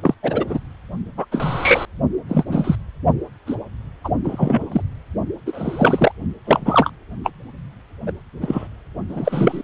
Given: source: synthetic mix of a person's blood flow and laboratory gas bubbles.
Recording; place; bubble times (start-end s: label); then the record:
Doppler ultrasound of blood flow; precordium
0.02-0.14 s: bubbles
0.23-0.59 s: bubbles
1.17-1.26 s: bubbles
1.31-1.85 s: bubbles
2.29-2.44 s: bubbles
2.48-2.75 s: bubbles
3.46-3.56 s: bubbles
4.04-4.09 s: bubbles
4.23-4.81 s: bubbles
5.46-6.11 s: bubbles
6.44-6.90 s: bubbles
7.23-7.30 s: bubbles
8.06-8.12 s: bubbles
8.40-8.67 s: bubbles
9.09-9.62 s: bubbles
From the record:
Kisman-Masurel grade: 243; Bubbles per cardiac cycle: several, 3 to 8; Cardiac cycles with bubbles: 100%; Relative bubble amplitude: loud (0.450 to 0.775); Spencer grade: 3 (all of the cardiac periods contain showers or single bubble signals, but not dominating or overriding the cardiac motion signals); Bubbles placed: only in the low amplitude regions of the cardiac cycle